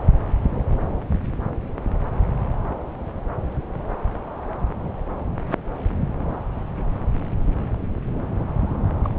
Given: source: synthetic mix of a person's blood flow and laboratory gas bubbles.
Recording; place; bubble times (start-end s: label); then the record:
Doppler ultrasound of blood flow; subclavian vein
9.04-9.15 s: bubbles
From the record:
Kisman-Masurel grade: 111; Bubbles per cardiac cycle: 1 to 2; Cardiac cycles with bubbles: 1 to 10%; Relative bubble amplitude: barely perceptible (0.100 to 0.250); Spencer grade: 1 (occasional bubble signal discernible with the cardiac motion signal, with majority of cardiac periods free of bubbles); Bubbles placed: anywhere in the cardiac cycle